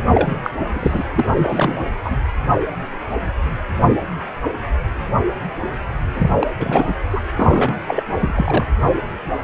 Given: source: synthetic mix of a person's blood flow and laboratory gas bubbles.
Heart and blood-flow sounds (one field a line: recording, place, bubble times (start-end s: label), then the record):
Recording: Doppler ultrasound of blood flow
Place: precordium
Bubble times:
0.00-0.02 s: bubbles
0.05-0.37 s: bubbles
0.43-0.50 s: bubbles
0.75-1.04 s: bubbles
1.15-1.25 s: bubbles
1.36-1.81 s: bubbles
2.04-2.17 s: bubbles
6.19-6.31 s: bubbles
6.39-6.47 s: bubbles
6.60-6.93 s: bubbles
7.10-7.20 s: bubbles
7.35-7.73 s: bubbles
7.87-8.03 s: bubbles
8.15-8.33 s: bubbles
8.36-8.67 s: bubbles
From the record:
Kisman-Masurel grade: 332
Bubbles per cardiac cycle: rolling drumbeat, 9 or more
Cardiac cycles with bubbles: 50 to 99%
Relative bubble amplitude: moderate (0.250 to 0.450)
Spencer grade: 3 (all of the cardiac periods contain showers or single bubble signals, but not dominating or overriding the cardiac motion signals)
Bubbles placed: anywhere in the cardiac cycle